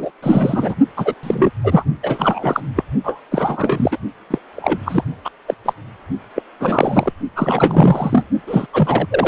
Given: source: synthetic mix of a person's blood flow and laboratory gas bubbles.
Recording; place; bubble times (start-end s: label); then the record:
Doppler ultrasound of blood flow; precordium
0.00-0.11 s: bubbles
0.23-0.74 s: bubbles
0.97-1.15 s: bubbles
1.23-1.51 s: bubbles
1.64-1.84 s: bubbles
2.03-2.60 s: bubbles
2.76-2.83 s: bubbles
3.04-3.20 s: bubbles
3.31-3.98 s: bubbles
4.30-4.38 s: bubbles
4.56-4.78 s: bubbles
4.86-5.04 s: bubbles
5.25-5.30 s: bubbles
5.47-5.54 s: bubbles
5.65-5.73 s: bubbles
6.35-6.42 s: bubbles
6.60-7.12 s: bubbles
7.36-8.26 s: bubbles
8.46-8.66 s: bubbles
8.73-9.28 s: bubbles
From the record:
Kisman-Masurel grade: 343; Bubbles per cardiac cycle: rolling drumbeat, 9 or more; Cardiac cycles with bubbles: 100%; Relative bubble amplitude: loud (0.450 to 0.775); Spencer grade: 3 (all of the cardiac periods contain showers or single bubble signals, but not dominating or overriding the cardiac motion signals); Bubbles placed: only in the low amplitude regions of the cardiac cycle